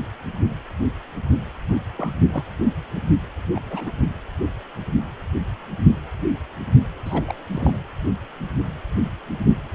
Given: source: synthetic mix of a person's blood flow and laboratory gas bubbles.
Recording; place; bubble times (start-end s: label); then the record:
Doppler ultrasound of blood flow; precordium
1.68-1.77 s: bubbles
1.96-2.11 s: bubbles
2.29-2.43 s: bubbles
3.54-3.92 s: bubbles
7.05-7.25 s: bubbles
7.27-7.33 s: bubbles
7.52-7.79 s: bubbles
From the record:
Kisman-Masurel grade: 221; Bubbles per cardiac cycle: several, 3 to 8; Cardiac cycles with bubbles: 10 to 50%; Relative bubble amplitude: barely perceptible (0.100 to 0.250); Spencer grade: 2 (many but less than half of the cardiac periods contain bubble signals, singularly or in groups); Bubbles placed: anywhere in the cardiac cycle